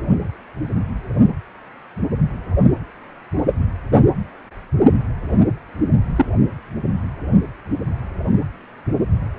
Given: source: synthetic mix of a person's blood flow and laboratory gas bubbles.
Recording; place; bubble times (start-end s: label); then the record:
Doppler ultrasound of blood flow; precordium
6.16-6.25 s: bubbles
From the record:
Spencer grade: 2 (many but less than half of the cardiac periods contain bubble signals, singularly or in groups); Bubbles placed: only in the low amplitude regions of the cardiac cycle